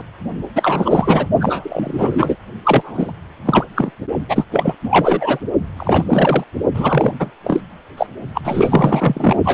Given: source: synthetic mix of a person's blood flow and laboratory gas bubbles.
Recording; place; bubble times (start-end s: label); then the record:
Doppler ultrasound of blood flow; precordium
0.55-1.27 s: bubbles
1.40-2.36 s: bubbles
2.65-3.12 s: bubbles
3.45-3.65 s: bubbles
3.75-3.91 s: bubbles
4.29-4.45 s: bubbles
4.52-4.75 s: bubbles
4.83-5.39 s: bubbles
5.77-6.44 s: bubbles
6.74-7.12 s: bubbles
7.20-7.30 s: bubbles
7.44-7.61 s: bubbles
7.97-8.06 s: bubbles
8.34-8.41 s: bubbles
8.44-9.37 s: bubbles
9.44-9.53 s: bubbles
From the record:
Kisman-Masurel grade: 333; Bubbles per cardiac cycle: rolling drumbeat, 9 or more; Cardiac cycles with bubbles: 50 to 99%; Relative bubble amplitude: loud (0.450 to 0.775); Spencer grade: 3 (all of the cardiac periods contain showers or single bubble signals, but not dominating or overriding the cardiac motion signals); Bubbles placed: only in the low amplitude regions of the cardiac cycle